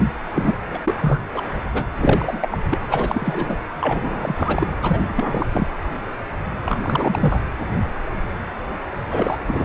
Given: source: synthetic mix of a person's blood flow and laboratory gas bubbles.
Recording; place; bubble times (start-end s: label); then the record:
Doppler ultrasound of blood flow; precordium
0.33-0.55 s: bubbles
0.62-1.25 s: bubbles
1.34-1.43 s: bubbles
1.73-1.85 s: bubbles
1.96-2.49 s: bubbles
2.51-2.58 s: bubbles
2.71-2.80 s: bubbles
2.88-3.60 s: bubbles
3.80-4.67 s: bubbles
4.81-5.46 s: bubbles
5.52-5.67 s: bubbles
6.66-6.80 s: bubbles
6.83-7.40 s: bubbles
9.10-9.38 s: bubbles
9.47-9.65 s: bubbles
From the record:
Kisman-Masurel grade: 333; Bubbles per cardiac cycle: rolling drumbeat, 9 or more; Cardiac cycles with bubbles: 50 to 99%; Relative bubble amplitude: loud (0.450 to 0.775); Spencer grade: 3 (all of the cardiac periods contain showers or single bubble signals, but not dominating or overriding the cardiac motion signals); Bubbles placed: anywhere in the cardiac cycle